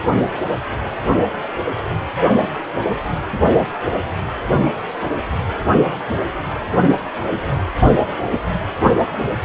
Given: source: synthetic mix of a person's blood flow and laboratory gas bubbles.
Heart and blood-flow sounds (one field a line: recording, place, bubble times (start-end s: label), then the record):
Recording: Doppler ultrasound of blood flow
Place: precordium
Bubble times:
no bubbles
From the record:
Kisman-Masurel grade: 000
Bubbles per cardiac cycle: 0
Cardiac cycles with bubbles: 0%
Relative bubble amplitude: no bubbles discernible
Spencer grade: 0 (complete lack of bubble signals)